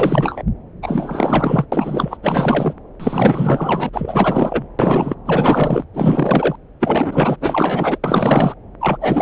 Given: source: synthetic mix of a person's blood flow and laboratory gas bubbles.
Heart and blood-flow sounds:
Doppler ultrasound of blood flow; subclavian vein
0.00-0.43 s: bubbles
0.82-1.66 s: bubbles
1.72-2.17 s: bubbles
2.22-2.75 s: bubbles
3.00-3.89 s: bubbles
3.92-4.65 s: bubbles
4.79-5.15 s: bubbles
5.25-5.84 s: bubbles
5.93-6.55 s: bubbles
6.80-7.36 s: bubbles
7.40-7.99 s: bubbles
8.04-8.54 s: bubbles
8.80-8.97 s: bubbles
9.00-9.22 s: bubbles
From the record:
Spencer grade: 4 (maximum detectable bubble signal sounding continuously throughout systole and diastole of every cardiac period, and overriding the amplitude of the normal cardiac signals); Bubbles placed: anywhere in the cardiac cycle

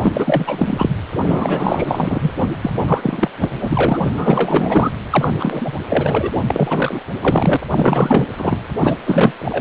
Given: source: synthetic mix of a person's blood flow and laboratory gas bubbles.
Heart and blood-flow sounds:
Doppler ultrasound of blood flow; precordium
0.03-0.90 s: bubbles
1.19-2.31 s: bubbles
2.62-2.77 s: bubbles
2.86-3.32 s: bubbles
3.40-3.99 s: bubbles
4.10-4.13 s: bubbles
4.17-4.92 s: bubbles
5.10-5.31 s: bubbles
5.39-5.73 s: bubbles
5.89-6.30 s: bubbles
6.46-7.02 s: bubbles
7.22-7.57 s: bubbles
7.68-8.27 s: bubbles
8.37-8.63 s: bubbles
8.80-8.97 s: bubbles
9.05-9.32 s: bubbles
9.39-9.61 s: bubbles
From the record:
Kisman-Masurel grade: 444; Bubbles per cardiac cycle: continuous sound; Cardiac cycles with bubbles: 100%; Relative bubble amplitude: maximal (0.775 to 0.999); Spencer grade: 4 (maximum detectable bubble signal sounding continuously throughout systole and diastole of every cardiac period, and overriding the amplitude of the normal cardiac signals); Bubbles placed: anywhere in the cardiac cycle

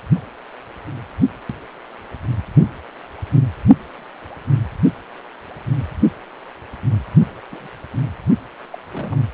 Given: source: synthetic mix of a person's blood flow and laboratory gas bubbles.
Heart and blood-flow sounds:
Doppler ultrasound of blood flow; precordium
7.51-7.68 s: bubbles
8.73-8.78 s: bubbles
8.91-9.22 s: bubbles
From the record:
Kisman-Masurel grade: 121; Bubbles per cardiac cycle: 1 to 2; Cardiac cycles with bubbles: 10 to 50%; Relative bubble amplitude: barely perceptible (0.100 to 0.250); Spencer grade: 2 (many but less than half of the cardiac periods contain bubble signals, singularly or in groups); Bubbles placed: only in the low amplitude regions of the cardiac cycle

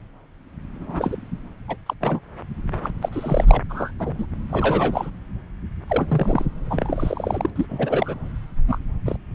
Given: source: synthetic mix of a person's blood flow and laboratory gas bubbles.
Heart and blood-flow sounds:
Doppler ultrasound of blood flow; subclavian vein
0.76-1.17 s: bubbles
1.68-1.76 s: bubbles
1.86-1.94 s: bubbles
2.00-2.20 s: bubbles
2.83-2.91 s: bubbles
3.01-3.09 s: bubbles
3.12-3.63 s: bubbles
3.69-3.91 s: bubbles
3.99-4.14 s: bubbles
4.17-4.26 s: bubbles
4.50-5.10 s: bubbles
5.88-6.45 s: bubbles
6.70-7.50 s: bubbles
7.55-7.66 s: bubbles
7.69-8.15 s: bubbles
8.67-8.78 s: bubbles
9.06-9.16 s: bubbles
From the record:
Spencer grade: 3 (all of the cardiac periods contain showers or single bubble signals, but not dominating or overriding the cardiac motion signals); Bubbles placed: anywhere in the cardiac cycle

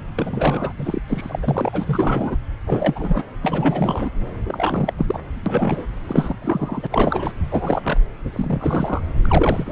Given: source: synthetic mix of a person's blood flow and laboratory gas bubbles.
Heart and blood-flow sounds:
Doppler ultrasound of blood flow; subclavian vein
0.16-0.72 s: bubbles
0.77-1.00 s: bubbles
1.08-1.39 s: bubbles
1.42-2.37 s: bubbles
2.67-3.24 s: bubbles
3.42-4.11 s: bubbles
4.48-4.93 s: bubbles
4.98-5.19 s: bubbles
5.46-5.85 s: bubbles
6.07-6.36 s: bubbles
6.42-6.87 s: bubbles
6.92-7.32 s: bubbles
7.51-7.99 s: bubbles
8.23-9.01 s: bubbles
9.22-9.72 s: bubbles
From the record:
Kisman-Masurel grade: 342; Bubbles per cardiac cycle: rolling drumbeat, 9 or more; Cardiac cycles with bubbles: 100%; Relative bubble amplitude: moderate (0.250 to 0.450); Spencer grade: 3 (all of the cardiac periods contain showers or single bubble signals, but not dominating or overriding the cardiac motion signals); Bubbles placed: anywhere in the cardiac cycle

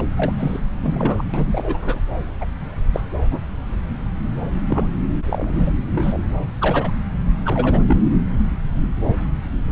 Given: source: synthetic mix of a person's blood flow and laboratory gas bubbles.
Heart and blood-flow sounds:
Doppler ultrasound of blood flow; subclavian vein
0.00-0.02 s: bubbles
0.17-0.32 s: bubbles
0.39-0.60 s: bubbles
0.83-1.24 s: bubbles
1.33-1.44 s: bubbles
1.47-1.79 s: bubbles
1.82-2.00 s: bubbles
2.41-2.45 s: bubbles
2.93-3.02 s: bubbles
3.31-3.39 s: bubbles
4.67-4.88 s: bubbles
5.25-5.72 s: bubbles
5.90-6.18 s: bubbles
6.59-6.91 s: bubbles
7.45-7.83 s: bubbles
7.87-8.04 s: bubbles
From the record:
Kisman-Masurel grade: 232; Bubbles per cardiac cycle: several, 3 to 8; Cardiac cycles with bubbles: 50 to 99%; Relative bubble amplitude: moderate (0.250 to 0.450); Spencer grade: 3 (all of the cardiac periods contain showers or single bubble signals, but not dominating or overriding the cardiac motion signals); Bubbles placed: anywhere in the cardiac cycle

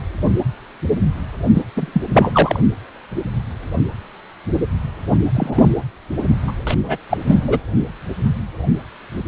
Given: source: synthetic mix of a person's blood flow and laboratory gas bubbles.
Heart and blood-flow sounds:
Doppler ultrasound of blood flow; precordium
1.54-1.65 s: bubbles
1.76-2.02 s: bubbles
2.14-2.60 s: bubbles
5.35-5.69 s: bubbles
6.47-6.53 s: bubbles
6.67-6.75 s: bubbles
6.84-6.96 s: bubbles
7.09-7.17 s: bubbles
7.26-7.59 s: bubbles
From the record:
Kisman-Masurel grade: 223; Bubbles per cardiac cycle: several, 3 to 8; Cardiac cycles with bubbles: 10 to 50%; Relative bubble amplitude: loud (0.450 to 0.775); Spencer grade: 2 (many but less than half of the cardiac periods contain bubble signals, singularly or in groups); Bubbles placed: only in the low amplitude regions of the cardiac cycle

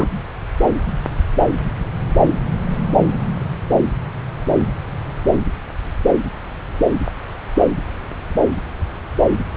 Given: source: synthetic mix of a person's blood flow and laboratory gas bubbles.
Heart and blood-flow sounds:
Doppler ultrasound of blood flow; subclavian vein
0.00-0.09 s: bubbles
From the record:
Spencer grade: 1 (occasional bubble signal discernible with the cardiac motion signal, with majority of cardiac periods free of bubbles); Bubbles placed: anywhere in the cardiac cycle

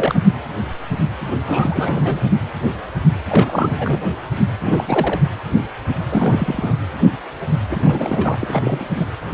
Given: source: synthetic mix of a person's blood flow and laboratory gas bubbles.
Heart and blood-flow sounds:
Doppler ultrasound of blood flow; precordium
0.00-0.20 s: bubbles
1.46-2.26 s: bubbles
3.27-4.01 s: bubbles
4.60-4.84 s: bubbles
4.87-5.20 s: bubbles
6.10-6.78 s: bubbles
7.70-7.80 s: bubbles
7.84-8.38 s: bubbles
8.40-8.85 s: bubbles
8.95-9.06 s: bubbles
From the record:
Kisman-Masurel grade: 332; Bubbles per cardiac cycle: rolling drumbeat, 9 or more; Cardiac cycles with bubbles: 50 to 99%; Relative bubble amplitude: moderate (0.250 to 0.450); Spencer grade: 3 (all of the cardiac periods contain showers or single bubble signals, but not dominating or overriding the cardiac motion signals); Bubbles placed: anywhere in the cardiac cycle

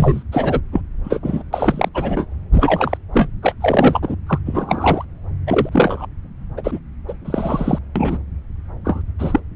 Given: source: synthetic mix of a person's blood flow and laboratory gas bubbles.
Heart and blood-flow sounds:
Doppler ultrasound of blood flow; subclavian vein
0.00-0.23 s: bubbles
0.32-0.60 s: bubbles
0.73-0.81 s: bubbles
1.04-1.20 s: bubbles
1.23-1.43 s: bubbles
1.53-1.89 s: bubbles
1.94-2.26 s: bubbles
2.53-2.97 s: bubbles
3.12-3.28 s: bubbles
3.42-3.54 s: bubbles
3.60-4.00 s: bubbles
4.02-4.15 s: bubbles
4.26-4.38 s: bubbles
4.46-5.05 s: bubbles
5.46-5.69 s: bubbles
5.71-6.06 s: bubbles
6.56-6.61 s: bubbles
6.63-6.79 s: bubbles
7.08-7.13 s: bubbles
7.25-7.79 s: bubbles
7.95-8.18 s: bubbles
8.85-9.02 s: bubbles
9.19-9.40 s: bubbles
From the record:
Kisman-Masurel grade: 243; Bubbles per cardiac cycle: several, 3 to 8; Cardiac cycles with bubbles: 100%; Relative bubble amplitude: loud (0.450 to 0.775); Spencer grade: 3 (all of the cardiac periods contain showers or single bubble signals, but not dominating or overriding the cardiac motion signals); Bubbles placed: anywhere in the cardiac cycle

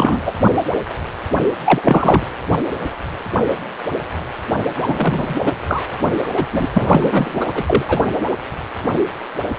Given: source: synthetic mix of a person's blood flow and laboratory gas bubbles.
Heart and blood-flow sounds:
Doppler ultrasound of blood flow; precordium
0.00-0.22 s: bubbles
0.26-0.32 s: bubbles
1.65-1.81 s: bubbles
1.84-2.25 s: bubbles
4.75-5.41 s: bubbles
5.43-5.53 s: bubbles
5.67-5.83 s: bubbles
6.04-6.09 s: bubbles
6.33-6.46 s: bubbles
6.51-6.68 s: bubbles
6.74-7.63 s: bubbles
7.66-7.85 s: bubbles
7.88-8.01 s: bubbles
From the record:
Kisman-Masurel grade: 333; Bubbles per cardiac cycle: rolling drumbeat, 9 or more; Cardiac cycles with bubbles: 50 to 99%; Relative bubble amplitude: loud (0.450 to 0.775); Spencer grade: 3 (all of the cardiac periods contain showers or single bubble signals, but not dominating or overriding the cardiac motion signals); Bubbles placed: anywhere in the cardiac cycle

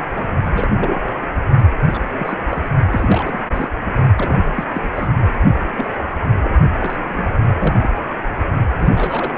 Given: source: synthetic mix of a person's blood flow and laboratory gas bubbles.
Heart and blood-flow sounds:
Doppler ultrasound of blood flow; precordium
0.16-0.32 s: bubbles
0.44-1.17 s: bubbles
1.81-2.00 s: bubbles
2.18-2.38 s: bubbles
2.50-2.67 s: bubbles
2.91-3.39 s: bubbles
3.55-3.69 s: bubbles
4.17-4.41 s: bubbles
4.46-4.50 s: bubbles
4.55-4.65 s: bubbles
4.73-4.89 s: bubbles
4.95-5.09 s: bubbles
5.77-5.89 s: bubbles
6.42-6.57 s: bubbles
6.80-6.96 s: bubbles
7.15-7.33 s: bubbles
7.58-7.75 s: bubbles
7.81-7.92 s: bubbles
8.79-9.33 s: bubbles
From the record:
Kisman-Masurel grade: 242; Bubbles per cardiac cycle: several, 3 to 8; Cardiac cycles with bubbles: 100%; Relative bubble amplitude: moderate (0.250 to 0.450); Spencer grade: 3 (all of the cardiac periods contain showers or single bubble signals, but not dominating or overriding the cardiac motion signals); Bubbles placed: only in the low amplitude regions of the cardiac cycle

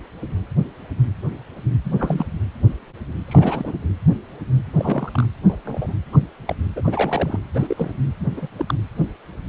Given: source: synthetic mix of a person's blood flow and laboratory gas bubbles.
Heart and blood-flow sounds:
Doppler ultrasound of blood flow; precordium
1.84-2.26 s: bubbles
3.28-3.73 s: bubbles
4.74-5.11 s: bubbles
5.14-5.28 s: bubbles
5.48-5.57 s: bubbles
5.64-5.92 s: bubbles
6.12-6.20 s: bubbles
6.46-6.56 s: bubbles
6.76-6.81 s: bubbles
6.84-7.39 s: bubbles
7.54-7.92 s: bubbles
8.20-8.26 s: bubbles
8.37-8.48 s: bubbles
8.58-8.75 s: bubbles
From the record:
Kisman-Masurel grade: 232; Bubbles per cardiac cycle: several, 3 to 8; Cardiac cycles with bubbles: 50 to 99%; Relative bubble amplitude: moderate (0.250 to 0.450); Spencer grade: 3 (all of the cardiac periods contain showers or single bubble signals, but not dominating or overriding the cardiac motion signals); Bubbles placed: anywhere in the cardiac cycle

